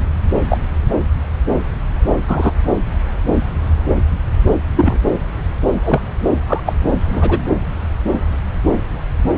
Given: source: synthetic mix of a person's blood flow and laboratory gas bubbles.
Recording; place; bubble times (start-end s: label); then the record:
Doppler ultrasound of blood flow; subclavian vein
0.49-0.57 s: bubbles
2.27-2.52 s: bubbles
4.76-4.98 s: bubbles
5.84-6.00 s: bubbles
6.47-6.61 s: bubbles
6.65-6.73 s: bubbles
7.12-7.38 s: bubbles
From the record:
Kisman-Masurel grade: 123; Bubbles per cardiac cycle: 1 to 2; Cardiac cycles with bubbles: 10 to 50%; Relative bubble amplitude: loud (0.450 to 0.775); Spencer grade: 2 (many but less than half of the cardiac periods contain bubble signals, singularly or in groups); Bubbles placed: anywhere in the cardiac cycle